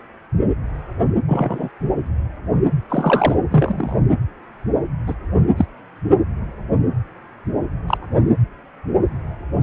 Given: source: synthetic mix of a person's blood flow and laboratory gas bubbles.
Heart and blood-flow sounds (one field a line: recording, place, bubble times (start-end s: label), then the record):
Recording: Doppler ultrasound of blood flow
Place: precordium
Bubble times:
1.27-1.68 s: bubbles
2.89-3.37 s: bubbles
3.50-3.96 s: bubbles
5.06-5.14 s: bubbles
5.56-5.65 s: bubbles
6.10-6.17 s: bubbles
7.88-7.98 s: bubbles
From the record:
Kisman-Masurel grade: 123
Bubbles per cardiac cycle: 1 to 2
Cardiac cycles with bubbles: 10 to 50%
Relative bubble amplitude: loud (0.450 to 0.775)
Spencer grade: 2 (many but less than half of the cardiac periods contain bubble signals, singularly or in groups)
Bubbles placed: anywhere in the cardiac cycle